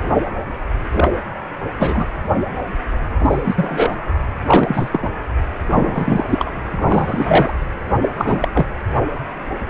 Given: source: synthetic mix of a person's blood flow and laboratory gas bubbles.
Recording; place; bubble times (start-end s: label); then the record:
Doppler ultrasound of blood flow; precordium
0.91-1.09 s: bubbles
1.78-2.06 s: bubbles
3.19-3.96 s: bubbles
4.46-4.89 s: bubbles
4.92-5.09 s: bubbles
5.68-6.57 s: bubbles
6.74-7.54 s: bubbles
8.01-8.09 s: bubbles
8.16-8.48 s: bubbles
8.53-8.66 s: bubbles
From the record:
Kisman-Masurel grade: 233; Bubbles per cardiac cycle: several, 3 to 8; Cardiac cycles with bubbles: 50 to 99%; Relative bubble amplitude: loud (0.450 to 0.775); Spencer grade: 3 (all of the cardiac periods contain showers or single bubble signals, but not dominating or overriding the cardiac motion signals); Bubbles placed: anywhere in the cardiac cycle